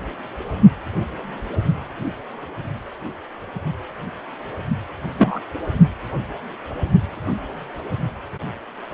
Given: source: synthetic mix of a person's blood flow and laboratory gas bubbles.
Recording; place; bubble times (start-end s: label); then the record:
Doppler ultrasound of blood flow; precordium
5.18-5.39 s: bubbles
From the record:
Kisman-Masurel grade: 113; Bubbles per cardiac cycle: 1 to 2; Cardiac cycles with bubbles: 1 to 10%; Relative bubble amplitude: loud (0.450 to 0.775); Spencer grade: 1 (occasional bubble signal discernible with the cardiac motion signal, with majority of cardiac periods free of bubbles); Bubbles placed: only in the low amplitude regions of the cardiac cycle